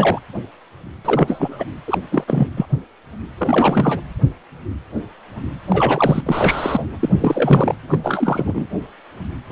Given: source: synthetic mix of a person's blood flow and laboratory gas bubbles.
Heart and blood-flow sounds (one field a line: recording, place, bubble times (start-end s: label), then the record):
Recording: Doppler ultrasound of blood flow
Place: precordium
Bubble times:
0.00-0.19 s: bubbles
1.05-1.65 s: bubbles
1.87-1.98 s: bubbles
2.10-2.24 s: bubbles
2.27-2.47 s: bubbles
2.56-2.67 s: bubbles
3.38-4.00 s: bubbles
5.68-6.23 s: bubbles
6.26-6.86 s: bubbles
6.99-7.75 s: bubbles
7.88-8.00 s: bubbles
8.04-8.68 s: bubbles
9.49-9.52 s: bubbles
From the record:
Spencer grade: 3 (all of the cardiac periods contain showers or single bubble signals, but not dominating or overriding the cardiac motion signals)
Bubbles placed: anywhere in the cardiac cycle